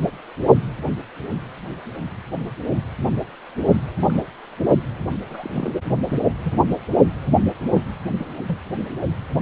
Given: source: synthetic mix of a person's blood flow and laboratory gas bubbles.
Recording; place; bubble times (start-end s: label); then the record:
Doppler ultrasound of blood flow; precordium
4.00-4.21 s: bubbles
5.30-5.71 s: bubbles
6.10-6.18 s: bubbles
6.43-6.53 s: bubbles
7.72-7.82 s: bubbles
8.18-8.28 s: bubbles
8.47-8.58 s: bubbles
From the record:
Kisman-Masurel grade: 121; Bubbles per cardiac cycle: 1 to 2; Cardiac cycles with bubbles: 10 to 50%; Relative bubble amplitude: barely perceptible (0.100 to 0.250); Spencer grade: 2 (many but less than half of the cardiac periods contain bubble signals, singularly or in groups); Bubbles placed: only in the low amplitude regions of the cardiac cycle